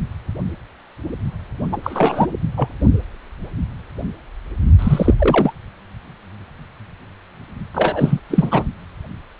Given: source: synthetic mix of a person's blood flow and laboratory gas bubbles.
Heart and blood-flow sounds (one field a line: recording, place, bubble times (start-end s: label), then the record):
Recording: Doppler ultrasound of blood flow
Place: precordium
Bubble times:
1.71-1.77 s: bubbles
1.83-2.27 s: bubbles
2.57-2.69 s: bubbles
4.79-5.15 s: bubbles
5.19-5.53 s: bubbles
7.74-8.20 s: bubbles
8.30-8.63 s: bubbles
From the record:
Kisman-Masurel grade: 223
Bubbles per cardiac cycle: several, 3 to 8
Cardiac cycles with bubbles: 10 to 50%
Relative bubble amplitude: loud (0.450 to 0.775)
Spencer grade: 2 (many but less than half of the cardiac periods contain bubble signals, singularly or in groups)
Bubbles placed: only in the low amplitude regions of the cardiac cycle